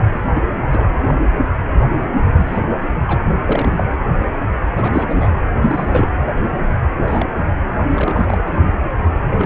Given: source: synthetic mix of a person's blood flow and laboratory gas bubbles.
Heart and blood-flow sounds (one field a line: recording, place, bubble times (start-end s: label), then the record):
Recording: Doppler ultrasound of blood flow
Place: precordium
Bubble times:
0.14-0.20 s: bubbles
0.35-0.41 s: bubbles
0.73-1.21 s: bubbles
1.98-2.09 s: bubbles
2.32-2.60 s: bubbles
3.04-3.23 s: bubbles
3.46-3.83 s: bubbles
4.72-5.44 s: bubbles
5.56-6.08 s: bubbles
7.06-7.26 s: bubbles
7.37-7.44 s: bubbles
7.94-8.43 s: bubbles
8.47-8.67 s: bubbles
9.21-9.46 s: bubbles
From the record:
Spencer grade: 3 (all of the cardiac periods contain showers or single bubble signals, but not dominating or overriding the cardiac motion signals)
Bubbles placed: anywhere in the cardiac cycle